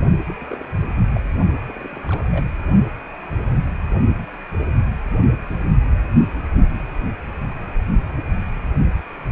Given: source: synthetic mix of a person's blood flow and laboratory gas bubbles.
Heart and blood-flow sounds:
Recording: Doppler ultrasound of blood flow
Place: precordium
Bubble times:
0.27-0.34 s: bubbles
0.41-0.46 s: bubbles
0.48-0.78 s: bubbles
0.80-0.94 s: bubbles
1.15-1.20 s: bubbles
1.67-2.00 s: bubbles
2.04-2.22 s: bubbles
2.31-2.45 s: bubbles
From the record:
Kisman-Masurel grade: 221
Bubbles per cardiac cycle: several, 3 to 8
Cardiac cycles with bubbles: 10 to 50%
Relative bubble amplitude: barely perceptible (0.100 to 0.250)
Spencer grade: 2 (many but less than half of the cardiac periods contain bubble signals, singularly or in groups)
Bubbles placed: only in the low amplitude regions of the cardiac cycle

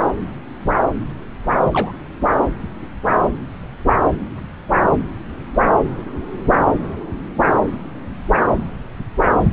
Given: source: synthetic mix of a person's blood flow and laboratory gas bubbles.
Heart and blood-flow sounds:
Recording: Doppler ultrasound of blood flow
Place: subclavian vein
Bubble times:
1.72-1.92 s: bubbles
From the record:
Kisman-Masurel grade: 112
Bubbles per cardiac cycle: 1 to 2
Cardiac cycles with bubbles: 1 to 10%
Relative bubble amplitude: moderate (0.250 to 0.450)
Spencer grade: 1 (occasional bubble signal discernible with the cardiac motion signal, with majority of cardiac periods free of bubbles)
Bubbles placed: anywhere in the cardiac cycle

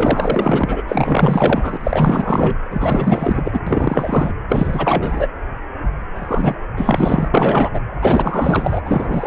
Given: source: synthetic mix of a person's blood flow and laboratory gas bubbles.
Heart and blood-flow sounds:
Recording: Doppler ultrasound of blood flow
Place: precordium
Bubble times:
0.00-0.82 s: bubbles
0.88-1.77 s: bubbles
1.80-2.56 s: bubbles
2.70-3.42 s: bubbles
3.45-3.60 s: bubbles
3.67-4.32 s: bubbles
4.48-5.27 s: bubbles
6.14-6.55 s: bubbles
6.76-7.29 s: bubbles
7.33-7.69 s: bubbles
7.73-7.81 s: bubbles
8.01-8.81 s: bubbles
8.85-9.27 s: bubbles
From the record:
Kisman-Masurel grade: 444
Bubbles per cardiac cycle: continuous sound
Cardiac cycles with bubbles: 100%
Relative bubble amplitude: maximal (0.775 to 0.999)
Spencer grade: 4 (maximum detectable bubble signal sounding continuously throughout systole and diastole of every cardiac period, and overriding the amplitude of the normal cardiac signals)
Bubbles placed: anywhere in the cardiac cycle

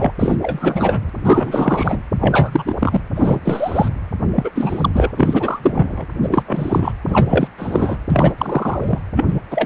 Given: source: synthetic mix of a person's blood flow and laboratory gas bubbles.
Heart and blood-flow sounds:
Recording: Doppler ultrasound of blood flow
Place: precordium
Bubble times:
0.00-0.12 s: bubbles
0.18-0.36 s: bubbles
0.41-0.99 s: bubbles
1.24-2.01 s: bubbles
2.20-2.75 s: bubbles
2.79-3.01 s: bubbles
3.15-3.40 s: bubbles
3.45-3.88 s: bubbles
4.33-4.50 s: bubbles
4.55-4.89 s: bubbles
4.92-5.12 s: bubbles
5.17-6.06 s: bubbles
6.22-6.43 s: bubbles
6.46-6.92 s: bubbles
7.08-7.48 s: bubbles
7.58-7.97 s: bubbles
8.10-8.32 s: bubbles
8.38-8.98 s: bubbles
9.16-9.25 s: bubbles
9.28-9.39 s: bubbles
9.51-9.66 s: bubbles
From the record:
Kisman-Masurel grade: 343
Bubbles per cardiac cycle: rolling drumbeat, 9 or more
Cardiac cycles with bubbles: 100%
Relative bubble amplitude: loud (0.450 to 0.775)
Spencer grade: 3 (all of the cardiac periods contain showers or single bubble signals, but not dominating or overriding the cardiac motion signals)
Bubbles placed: anywhere in the cardiac cycle

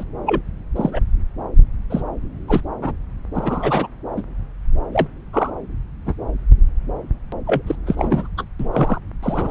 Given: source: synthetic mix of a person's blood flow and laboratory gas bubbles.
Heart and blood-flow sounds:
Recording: Doppler ultrasound of blood flow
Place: subclavian vein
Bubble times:
0.00-0.03 s: bubbles
0.26-0.41 s: bubbles
0.75-0.99 s: bubbles
1.90-2.02 s: bubbles
2.48-2.61 s: bubbles
2.81-2.92 s: bubbles
3.34-3.88 s: bubbles
4.17-4.22 s: bubbles
4.92-5.07 s: bubbles
5.33-5.50 s: bubbles
6.05-6.14 s: bubbles
7.46-7.62 s: bubbles
7.67-7.76 s: bubbles
7.86-8.28 s: bubbles
8.38-8.44 s: bubbles
8.60-8.69 s: bubbles
8.72-9.00 s: bubbles
9.22-9.51 s: bubbles
From the record:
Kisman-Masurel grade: 242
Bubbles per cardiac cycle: several, 3 to 8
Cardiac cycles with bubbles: 100%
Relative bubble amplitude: moderate (0.250 to 0.450)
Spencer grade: 3 (all of the cardiac periods contain showers or single bubble signals, but not dominating or overriding the cardiac motion signals)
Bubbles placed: anywhere in the cardiac cycle

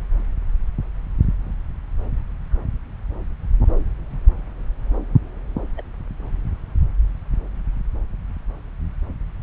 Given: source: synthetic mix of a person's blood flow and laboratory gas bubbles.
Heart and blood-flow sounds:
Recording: Doppler ultrasound of blood flow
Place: subclavian vein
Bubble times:
5.76-5.82 s: bubbles
From the record:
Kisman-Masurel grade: 111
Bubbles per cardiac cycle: 1 to 2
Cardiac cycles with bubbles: 1 to 10%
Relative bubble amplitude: barely perceptible (0.100 to 0.250)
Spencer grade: 1 (occasional bubble signal discernible with the cardiac motion signal, with majority of cardiac periods free of bubbles)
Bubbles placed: anywhere in the cardiac cycle

